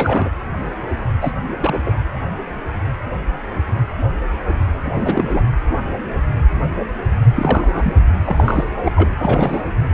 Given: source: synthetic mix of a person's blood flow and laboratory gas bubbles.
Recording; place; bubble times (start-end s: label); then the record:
Doppler ultrasound of blood flow; precordium
0.00-0.29 s: bubbles
1.21-1.32 s: bubbles
1.60-1.80 s: bubbles
1.85-1.93 s: bubbles
4.83-5.42 s: bubbles
7.35-7.95 s: bubbles
8.25-8.64 s: bubbles
8.85-8.92 s: bubbles
8.96-9.12 s: bubbles
9.16-9.72 s: bubbles
From the record:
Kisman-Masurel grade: 223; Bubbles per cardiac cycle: several, 3 to 8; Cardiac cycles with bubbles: 10 to 50%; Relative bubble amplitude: loud (0.450 to 0.775); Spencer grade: 2 (many but less than half of the cardiac periods contain bubble signals, singularly or in groups); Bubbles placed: anywhere in the cardiac cycle